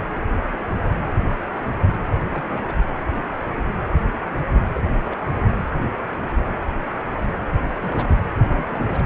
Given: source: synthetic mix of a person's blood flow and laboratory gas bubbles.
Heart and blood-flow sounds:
Doppler ultrasound of blood flow; precordium
2.25-2.44 s: bubbles
2.47-2.62 s: bubbles
2.68-2.73 s: bubbles
4.74-4.80 s: bubbles
5.05-5.17 s: bubbles
5.29-5.42 s: bubbles
7.76-8.20 s: bubbles
8.36-8.41 s: bubbles
8.50-9.03 s: bubbles
From the record:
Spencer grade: 2 (many but less than half of the cardiac periods contain bubble signals, singularly or in groups); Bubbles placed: anywhere in the cardiac cycle

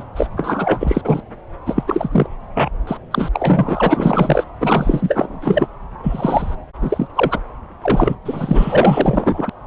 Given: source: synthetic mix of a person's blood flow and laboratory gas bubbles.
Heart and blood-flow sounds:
Doppler ultrasound of blood flow; subclavian vein
0.00-0.05 s: bubbles
0.15-0.27 s: bubbles
0.36-1.22 s: bubbles
1.66-1.83 s: bubbles
1.87-2.09 s: bubbles
2.12-2.27 s: bubbles
2.54-2.70 s: bubbles
2.87-2.97 s: bubbles
3.11-3.29 s: bubbles
3.33-4.44 s: bubbles
4.59-5.38 s: bubbles
5.41-5.67 s: bubbles
6.03-6.55 s: bubbles
6.81-7.07 s: bubbles
7.15-7.39 s: bubbles
7.81-8.15 s: bubbles
8.25-9.49 s: bubbles
From the record:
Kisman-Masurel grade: 444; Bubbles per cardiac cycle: continuous sound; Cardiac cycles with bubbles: 100%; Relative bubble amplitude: maximal (0.775 to 0.999); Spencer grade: 4 (maximum detectable bubble signal sounding continuously throughout systole and diastole of every cardiac period, and overriding the amplitude of the normal cardiac signals); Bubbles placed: anywhere in the cardiac cycle

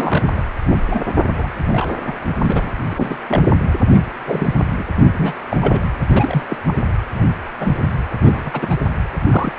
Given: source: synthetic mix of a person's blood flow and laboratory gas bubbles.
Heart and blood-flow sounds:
Doppler ultrasound of blood flow; precordium
0.00-0.43 s: bubbles
0.69-0.77 s: bubbles
0.91-0.99 s: bubbles
1.33-1.49 s: bubbles
1.67-1.94 s: bubbles
2.06-2.15 s: bubbles
2.35-2.74 s: bubbles
2.90-3.17 s: bubbles
3.28-3.43 s: bubbles
3.93-4.00 s: bubbles
4.25-4.54 s: bubbles
4.79-4.83 s: bubbles
4.99-5.12 s: bubbles
5.16-5.34 s: bubbles
5.49-5.57 s: bubbles
5.61-5.85 s: bubbles
6.09-6.43 s: bubbles
6.48-6.56 s: bubbles
6.67-6.74 s: bubbles
7.13-7.29 s: bubbles
7.60-7.75 s: bubbles
8.21-8.76 s: bubbles
9.24-9.59 s: bubbles
From the record:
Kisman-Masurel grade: 242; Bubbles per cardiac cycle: several, 3 to 8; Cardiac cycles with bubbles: 100%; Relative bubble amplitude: moderate (0.250 to 0.450); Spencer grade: 3 (all of the cardiac periods contain showers or single bubble signals, but not dominating or overriding the cardiac motion signals); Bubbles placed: anywhere in the cardiac cycle

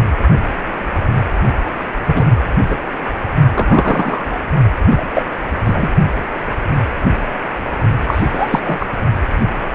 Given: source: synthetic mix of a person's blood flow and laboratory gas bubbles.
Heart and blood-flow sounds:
Doppler ultrasound of blood flow; precordium
2.06-2.26 s: bubbles
2.69-2.77 s: bubbles
3.55-4.41 s: bubbles
4.90-5.06 s: bubbles
5.15-5.23 s: bubbles
5.64-5.89 s: bubbles
8.07-8.59 s: bubbles
8.64-8.86 s: bubbles
From the record:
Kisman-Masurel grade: 223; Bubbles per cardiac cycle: several, 3 to 8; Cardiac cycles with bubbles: 10 to 50%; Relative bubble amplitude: loud (0.450 to 0.775); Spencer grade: 2 (many but less than half of the cardiac periods contain bubble signals, singularly or in groups); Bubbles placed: only in the low amplitude regions of the cardiac cycle

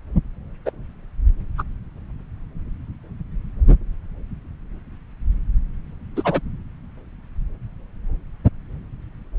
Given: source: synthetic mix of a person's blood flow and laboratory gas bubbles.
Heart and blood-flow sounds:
Doppler ultrasound of blood flow; subclavian vein
0.65-0.70 s: bubbles
1.58-1.63 s: bubbles
6.16-6.40 s: bubbles
From the record:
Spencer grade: 2 (many but less than half of the cardiac periods contain bubble signals, singularly or in groups); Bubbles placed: anywhere in the cardiac cycle

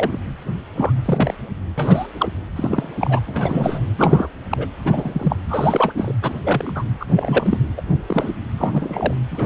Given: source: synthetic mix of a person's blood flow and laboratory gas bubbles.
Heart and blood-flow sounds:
Doppler ultrasound of blood flow; precordium
0.00-0.18 s: bubbles
0.75-0.92 s: bubbles
1.05-1.34 s: bubbles
1.77-2.08 s: bubbles
2.16-2.29 s: bubbles
2.56-2.89 s: bubbles
3.01-3.20 s: bubbles
3.27-3.81 s: bubbles
3.98-4.27 s: bubbles
4.50-4.67 s: bubbles
4.84-5.36 s: bubbles
5.49-5.93 s: bubbles
5.96-6.12 s: bubbles
6.21-6.33 s: bubbles
6.43-6.83 s: bubbles
7.00-7.57 s: bubbles
7.77-7.82 s: bubbles
8.06-8.33 s: bubbles
8.57-9.14 s: bubbles
9.31-9.46 s: bubbles
From the record:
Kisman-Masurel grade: 243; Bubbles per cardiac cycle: several, 3 to 8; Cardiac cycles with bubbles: 100%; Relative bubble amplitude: loud (0.450 to 0.775); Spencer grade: 3 (all of the cardiac periods contain showers or single bubble signals, but not dominating or overriding the cardiac motion signals); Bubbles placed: anywhere in the cardiac cycle

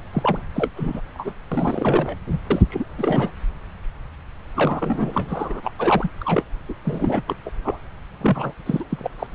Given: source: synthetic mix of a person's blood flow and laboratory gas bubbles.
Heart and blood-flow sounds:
Doppler ultrasound of blood flow; subclavian vein
0.12-0.41 s: bubbles
0.54-0.69 s: bubbles
0.76-1.01 s: bubbles
1.14-1.33 s: bubbles
1.52-2.17 s: bubbles
2.27-2.38 s: bubbles
2.50-2.62 s: bubbles
2.69-2.85 s: bubbles
2.98-3.30 s: bubbles
4.55-5.71 s: bubbles
5.78-6.11 s: bubbles
6.21-6.44 s: bubbles
6.69-6.74 s: bubbles
6.85-7.22 s: bubbles
7.28-7.34 s: bubbles
7.46-7.49 s: bubbles
7.64-7.79 s: bubbles
8.21-8.52 s: bubbles
8.66-8.84 s: bubbles
8.89-9.11 s: bubbles
9.19-9.27 s: bubbles
From the record:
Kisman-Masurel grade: 332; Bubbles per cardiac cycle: rolling drumbeat, 9 or more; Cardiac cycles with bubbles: 50 to 99%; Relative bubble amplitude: moderate (0.250 to 0.450); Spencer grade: 3 (all of the cardiac periods contain showers or single bubble signals, but not dominating or overriding the cardiac motion signals); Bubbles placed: anywhere in the cardiac cycle

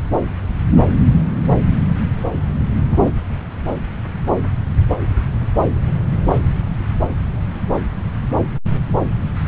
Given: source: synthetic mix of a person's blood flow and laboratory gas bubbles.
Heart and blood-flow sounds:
Doppler ultrasound of blood flow; subclavian vein
2.92-3.11 s: bubbles
From the record:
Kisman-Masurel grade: 113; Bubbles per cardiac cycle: 1 to 2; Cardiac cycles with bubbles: 1 to 10%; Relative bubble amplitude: loud (0.450 to 0.775); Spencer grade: 1 (occasional bubble signal discernible with the cardiac motion signal, with majority of cardiac periods free of bubbles); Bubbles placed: anywhere in the cardiac cycle

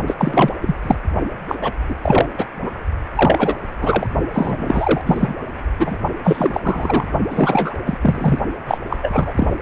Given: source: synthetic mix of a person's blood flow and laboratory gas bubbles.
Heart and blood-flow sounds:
Doppler ultrasound of blood flow; precordium
0.07-0.15 s: bubbles
0.18-0.53 s: bubbles
0.61-0.76 s: bubbles
0.82-0.95 s: bubbles
1.48-1.55 s: bubbles
1.61-1.72 s: bubbles
1.89-1.95 s: bubbles
2.02-2.28 s: bubbles
2.38-2.45 s: bubbles
2.62-2.71 s: bubbles
3.15-3.55 s: bubbles
3.79-4.07 s: bubbles
4.33-5.01 s: bubbles
5.06-5.35 s: bubbles
5.79-5.99 s: bubbles
6.24-6.60 s: bubbles
6.63-7.06 s: bubbles
7.29-7.74 s: bubbles
7.85-7.98 s: bubbles
8.01-8.39 s: bubbles
8.67-8.79 s: bubbles
8.90-8.97 s: bubbles
9.02-9.33 s: bubbles
9.37-9.49 s: bubbles
From the record:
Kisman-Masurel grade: 343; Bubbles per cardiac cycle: rolling drumbeat, 9 or more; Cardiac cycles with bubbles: 100%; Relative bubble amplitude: loud (0.450 to 0.775); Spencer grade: 3 (all of the cardiac periods contain showers or single bubble signals, but not dominating or overriding the cardiac motion signals); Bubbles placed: only in the low amplitude regions of the cardiac cycle

